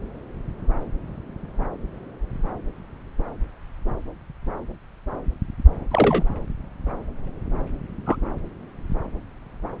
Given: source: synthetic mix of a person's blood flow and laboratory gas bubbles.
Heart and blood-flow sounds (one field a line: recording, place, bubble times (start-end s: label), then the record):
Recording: Doppler ultrasound of blood flow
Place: subclavian vein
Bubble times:
5.91-6.24 s: bubbles
8.06-8.17 s: bubbles
From the record:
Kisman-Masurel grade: 122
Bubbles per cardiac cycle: 1 to 2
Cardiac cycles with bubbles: 10 to 50%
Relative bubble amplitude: moderate (0.250 to 0.450)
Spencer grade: 2 (many but less than half of the cardiac periods contain bubble signals, singularly or in groups)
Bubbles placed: anywhere in the cardiac cycle